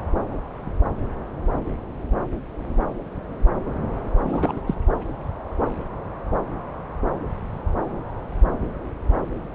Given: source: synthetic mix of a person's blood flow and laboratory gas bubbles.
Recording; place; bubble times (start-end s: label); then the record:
Doppler ultrasound of blood flow; subclavian vein
4.22-4.60 s: bubbles
4.67-4.74 s: bubbles
From the record:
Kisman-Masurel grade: 222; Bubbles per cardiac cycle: several, 3 to 8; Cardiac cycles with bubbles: 10 to 50%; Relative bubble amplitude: moderate (0.250 to 0.450); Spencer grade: 2 (many but less than half of the cardiac periods contain bubble signals, singularly or in groups); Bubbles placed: anywhere in the cardiac cycle